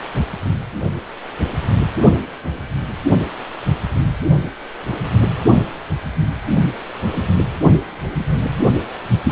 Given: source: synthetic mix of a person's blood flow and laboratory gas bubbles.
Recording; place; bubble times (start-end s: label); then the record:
Doppler ultrasound of blood flow; precordium
9.28-9.32 s: bubbles
From the record:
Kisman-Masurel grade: 111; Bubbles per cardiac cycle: 1 to 2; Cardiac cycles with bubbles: 1 to 10%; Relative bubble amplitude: barely perceptible (0.100 to 0.250); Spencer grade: 1 (occasional bubble signal discernible with the cardiac motion signal, with majority of cardiac periods free of bubbles); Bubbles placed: only in the low amplitude regions of the cardiac cycle